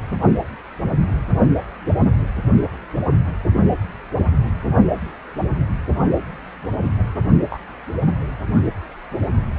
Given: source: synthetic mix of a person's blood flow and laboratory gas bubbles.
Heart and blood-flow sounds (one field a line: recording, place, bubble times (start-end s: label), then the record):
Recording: Doppler ultrasound of blood flow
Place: precordium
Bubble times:
7.50-7.62 s: bubbles
From the record:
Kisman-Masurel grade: 121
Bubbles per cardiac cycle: 1 to 2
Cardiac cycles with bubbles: 10 to 50%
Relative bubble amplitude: barely perceptible (0.100 to 0.250)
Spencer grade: 2 (many but less than half of the cardiac periods contain bubble signals, singularly or in groups)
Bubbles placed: only in the low amplitude regions of the cardiac cycle